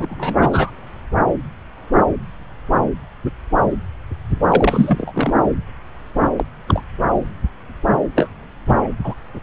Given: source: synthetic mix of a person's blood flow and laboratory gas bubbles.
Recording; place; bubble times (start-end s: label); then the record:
Doppler ultrasound of blood flow; subclavian vein
0.00-0.71 s: bubbles
4.48-5.34 s: bubbles
6.21-6.28 s: bubbles
6.37-6.45 s: bubbles
6.67-6.82 s: bubbles
8.15-8.29 s: bubbles
8.66-8.89 s: bubbles
9.04-9.14 s: bubbles
From the record:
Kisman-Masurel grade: 222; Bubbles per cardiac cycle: several, 3 to 8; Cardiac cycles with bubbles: 10 to 50%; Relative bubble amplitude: moderate (0.250 to 0.450); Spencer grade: 2 (many but less than half of the cardiac periods contain bubble signals, singularly or in groups); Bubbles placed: anywhere in the cardiac cycle